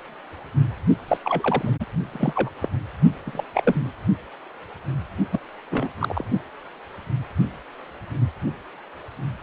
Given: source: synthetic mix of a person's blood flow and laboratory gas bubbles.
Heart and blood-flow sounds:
Doppler ultrasound of blood flow; precordium
1.08-1.18 s: bubbles
1.24-1.74 s: bubbles
1.80-1.86 s: bubbles
2.11-2.50 s: bubbles
2.61-2.68 s: bubbles
3.26-3.44 s: bubbles
3.54-3.92 s: bubbles
5.32-5.39 s: bubbles
5.71-5.88 s: bubbles
5.99-6.24 s: bubbles
From the record:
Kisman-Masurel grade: 222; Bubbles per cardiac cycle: several, 3 to 8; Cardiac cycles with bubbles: 10 to 50%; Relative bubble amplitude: moderate (0.250 to 0.450); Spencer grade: 2 (many but less than half of the cardiac periods contain bubble signals, singularly or in groups); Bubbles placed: only in the low amplitude regions of the cardiac cycle

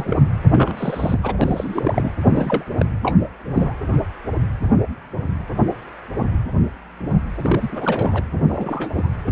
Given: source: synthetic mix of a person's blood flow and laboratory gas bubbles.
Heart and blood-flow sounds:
Doppler ultrasound of blood flow; precordium
0.00-0.21 s: bubbles
0.51-1.19 s: bubbles
1.23-1.34 s: bubbles
1.41-2.12 s: bubbles
2.24-2.64 s: bubbles
2.77-2.85 s: bubbles
3.02-3.18 s: bubbles
3.55-3.74 s: bubbles
7.39-8.24 s: bubbles
8.49-9.08 s: bubbles
9.27-9.32 s: bubbles
From the record:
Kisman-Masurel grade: 232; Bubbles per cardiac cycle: several, 3 to 8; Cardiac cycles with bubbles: 50 to 99%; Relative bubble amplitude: moderate (0.250 to 0.450); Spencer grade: 3 (all of the cardiac periods contain showers or single bubble signals, but not dominating or overriding the cardiac motion signals); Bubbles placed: anywhere in the cardiac cycle

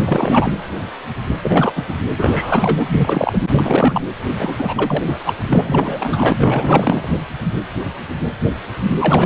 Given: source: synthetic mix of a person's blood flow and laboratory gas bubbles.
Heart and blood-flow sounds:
Doppler ultrasound of blood flow; precordium
0.04-0.52 s: bubbles
1.43-1.71 s: bubbles
1.75-1.83 s: bubbles
1.88-1.94 s: bubbles
2.17-2.86 s: bubbles
2.91-3.38 s: bubbles
3.53-4.01 s: bubbles
4.38-4.54 s: bubbles
4.58-5.19 s: bubbles
5.25-5.34 s: bubbles
5.50-6.32 s: bubbles
6.39-7.08 s: bubbles
8.99-9.26 s: bubbles
From the record:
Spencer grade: 3 (all of the cardiac periods contain showers or single bubble signals, but not dominating or overriding the cardiac motion signals); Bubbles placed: anywhere in the cardiac cycle

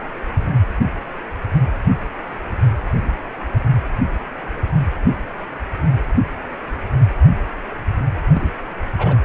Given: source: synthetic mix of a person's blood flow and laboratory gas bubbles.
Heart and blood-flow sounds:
Doppler ultrasound of blood flow; precordium
8.33-8.50 s: bubbles
8.97-9.16 s: bubbles
From the record:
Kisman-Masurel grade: 112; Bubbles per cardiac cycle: 1 to 2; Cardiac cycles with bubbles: 1 to 10%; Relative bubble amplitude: moderate (0.250 to 0.450); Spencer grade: 1 (occasional bubble signal discernible with the cardiac motion signal, with majority of cardiac periods free of bubbles); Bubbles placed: anywhere in the cardiac cycle

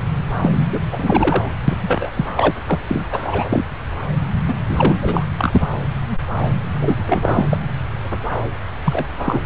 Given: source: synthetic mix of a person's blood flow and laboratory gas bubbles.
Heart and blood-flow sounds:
Doppler ultrasound of blood flow; subclavian vein
0.42-0.50 s: bubbles
0.72-0.79 s: bubbles
0.91-1.51 s: bubbles
1.67-1.77 s: bubbles
1.81-2.10 s: bubbles
2.16-2.26 s: bubbles
2.37-2.54 s: bubbles
2.67-2.81 s: bubbles
2.88-3.06 s: bubbles
3.10-3.21 s: bubbles
3.24-3.66 s: bubbles
4.47-4.54 s: bubbles
4.68-4.96 s: bubbles
5.01-5.27 s: bubbles
5.37-5.67 s: bubbles
6.81-6.95 s: bubbles
7.08-7.46 s: bubbles
7.50-7.59 s: bubbles
8.84-9.05 s: bubbles
9.25-9.39 s: bubbles
From the record:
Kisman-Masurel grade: 333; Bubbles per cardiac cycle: rolling drumbeat, 9 or more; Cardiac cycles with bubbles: 50 to 99%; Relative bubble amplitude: loud (0.450 to 0.775); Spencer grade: 3 (all of the cardiac periods contain showers or single bubble signals, but not dominating or overriding the cardiac motion signals); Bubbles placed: anywhere in the cardiac cycle

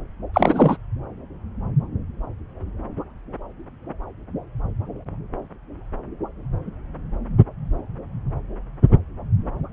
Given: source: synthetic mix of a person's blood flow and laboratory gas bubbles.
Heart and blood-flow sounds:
Doppler ultrasound of blood flow; subclavian vein
0.33-0.77 s: bubbles
From the record:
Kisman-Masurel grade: 213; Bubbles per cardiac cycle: several, 3 to 8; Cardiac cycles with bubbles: 1 to 10%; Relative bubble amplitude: loud (0.450 to 0.775); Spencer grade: 1 (occasional bubble signal discernible with the cardiac motion signal, with majority of cardiac periods free of bubbles); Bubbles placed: anywhere in the cardiac cycle

